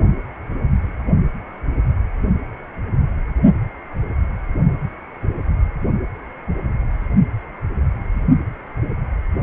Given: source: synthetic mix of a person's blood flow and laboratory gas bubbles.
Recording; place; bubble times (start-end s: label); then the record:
Doppler ultrasound of blood flow; precordium
no bubbles
From the record:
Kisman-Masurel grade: 000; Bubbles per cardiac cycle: 0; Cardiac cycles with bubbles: 0%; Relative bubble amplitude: no bubbles discernible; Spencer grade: 0 (complete lack of bubble signals)